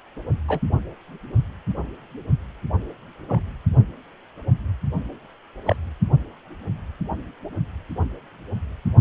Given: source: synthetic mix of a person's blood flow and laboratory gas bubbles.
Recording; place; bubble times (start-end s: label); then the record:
Doppler ultrasound of blood flow; precordium
0.48-0.60 s: bubbles
3.28-3.42 s: bubbles
5.66-5.76 s: bubbles
From the record:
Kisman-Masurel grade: 122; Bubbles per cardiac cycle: 1 to 2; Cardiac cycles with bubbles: 10 to 50%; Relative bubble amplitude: moderate (0.250 to 0.450); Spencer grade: 2 (many but less than half of the cardiac periods contain bubble signals, singularly or in groups); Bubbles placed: only in the low amplitude regions of the cardiac cycle